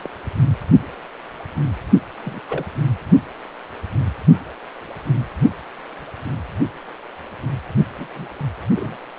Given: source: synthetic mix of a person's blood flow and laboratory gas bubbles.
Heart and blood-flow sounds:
Doppler ultrasound of blood flow; precordium
0.00-0.09 s: bubbles
2.24-2.40 s: bubbles
2.49-2.66 s: bubbles
7.98-8.06 s: bubbles
8.14-8.29 s: bubbles
8.75-8.96 s: bubbles
From the record:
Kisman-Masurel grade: 221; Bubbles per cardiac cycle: several, 3 to 8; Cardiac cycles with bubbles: 10 to 50%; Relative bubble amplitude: barely perceptible (0.100 to 0.250); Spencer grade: 2 (many but less than half of the cardiac periods contain bubble signals, singularly or in groups); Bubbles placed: only in the low amplitude regions of the cardiac cycle

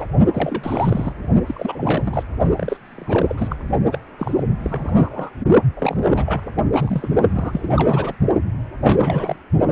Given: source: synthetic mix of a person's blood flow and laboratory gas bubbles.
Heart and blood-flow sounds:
Doppler ultrasound of blood flow; precordium
0.00-0.06 s: bubbles
0.34-1.12 s: bubbles
1.46-2.23 s: bubbles
2.56-2.77 s: bubbles
2.85-3.56 s: bubbles
3.92-3.99 s: bubbles
4.19-4.43 s: bubbles
4.60-5.30 s: bubbles
5.76-5.97 s: bubbles
6.05-6.41 s: bubbles
6.74-7.09 s: bubbles
7.33-8.13 s: bubbles
8.83-9.37 s: bubbles
From the record:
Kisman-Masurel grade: 342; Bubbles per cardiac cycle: rolling drumbeat, 9 or more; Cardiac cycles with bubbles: 100%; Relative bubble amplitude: moderate (0.250 to 0.450); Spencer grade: 3 (all of the cardiac periods contain showers or single bubble signals, but not dominating or overriding the cardiac motion signals); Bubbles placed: only in the low amplitude regions of the cardiac cycle

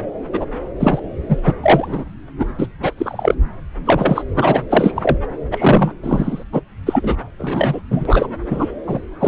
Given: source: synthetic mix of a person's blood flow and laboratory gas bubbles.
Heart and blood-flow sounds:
Doppler ultrasound of blood flow; subclavian vein
0.33-0.45 s: bubbles
0.80-0.99 s: bubbles
1.28-1.38 s: bubbles
1.44-1.54 s: bubbles
1.63-2.05 s: bubbles
2.39-2.46 s: bubbles
2.58-2.67 s: bubbles
2.82-2.93 s: bubbles
2.97-3.35 s: bubbles
3.85-4.25 s: bubbles
4.34-4.60 s: bubbles
4.69-5.17 s: bubbles
5.51-5.94 s: bubbles
6.02-6.43 s: bubbles
6.52-6.60 s: bubbles
6.86-7.16 s: bubbles
7.38-7.79 s: bubbles
7.91-8.28 s: bubbles
8.50-8.69 s: bubbles
8.87-9.00 s: bubbles
9.20-9.28 s: bubbles
From the record:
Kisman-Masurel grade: 243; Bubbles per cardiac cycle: several, 3 to 8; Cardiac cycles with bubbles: 100%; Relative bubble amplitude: loud (0.450 to 0.775); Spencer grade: 3 (all of the cardiac periods contain showers or single bubble signals, but not dominating or overriding the cardiac motion signals); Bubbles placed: anywhere in the cardiac cycle

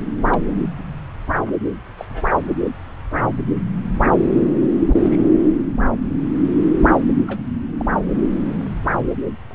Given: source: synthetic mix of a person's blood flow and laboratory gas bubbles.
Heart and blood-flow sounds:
Doppler ultrasound of blood flow; subclavian vein
0.26-0.43 s: bubbles
0.78-0.83 s: bubbles
1.33-1.43 s: bubbles
1.98-2.05 s: bubbles
2.09-2.22 s: bubbles
4.75-5.04 s: bubbles
5.10-5.19 s: bubbles
7.27-7.41 s: bubbles
7.78-7.85 s: bubbles
From the record:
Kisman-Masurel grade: 121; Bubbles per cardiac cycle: 1 to 2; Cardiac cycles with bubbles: 10 to 50%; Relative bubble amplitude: barely perceptible (0.100 to 0.250); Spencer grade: 2 (many but less than half of the cardiac periods contain bubble signals, singularly or in groups); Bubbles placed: anywhere in the cardiac cycle

